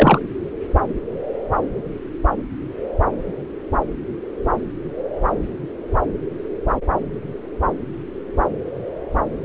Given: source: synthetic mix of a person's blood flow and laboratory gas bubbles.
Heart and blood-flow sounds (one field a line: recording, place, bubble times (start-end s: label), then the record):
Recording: Doppler ultrasound of blood flow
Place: subclavian vein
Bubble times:
0.00-0.19 s: bubbles
From the record:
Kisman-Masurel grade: 213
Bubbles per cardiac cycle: several, 3 to 8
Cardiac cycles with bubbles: 1 to 10%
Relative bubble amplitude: loud (0.450 to 0.775)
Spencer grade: 1 (occasional bubble signal discernible with the cardiac motion signal, with majority of cardiac periods free of bubbles)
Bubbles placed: anywhere in the cardiac cycle